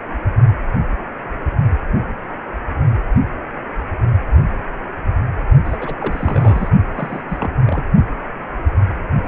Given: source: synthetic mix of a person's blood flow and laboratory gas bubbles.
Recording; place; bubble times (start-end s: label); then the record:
Doppler ultrasound of blood flow; precordium
5.65-5.96 s: bubbles
6.00-6.69 s: bubbles
6.94-7.22 s: bubbles
7.29-7.54 s: bubbles
7.66-7.84 s: bubbles
From the record:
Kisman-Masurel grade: 221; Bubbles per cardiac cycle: several, 3 to 8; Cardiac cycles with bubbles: 10 to 50%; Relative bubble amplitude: barely perceptible (0.100 to 0.250); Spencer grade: 2 (many but less than half of the cardiac periods contain bubble signals, singularly or in groups); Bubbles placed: only in the low amplitude regions of the cardiac cycle